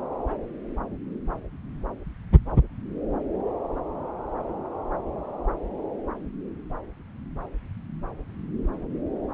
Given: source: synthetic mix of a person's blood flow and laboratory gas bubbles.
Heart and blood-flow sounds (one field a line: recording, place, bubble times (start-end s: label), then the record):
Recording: Doppler ultrasound of blood flow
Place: subclavian vein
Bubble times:
no bubbles
From the record:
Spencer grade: 0 (complete lack of bubble signals)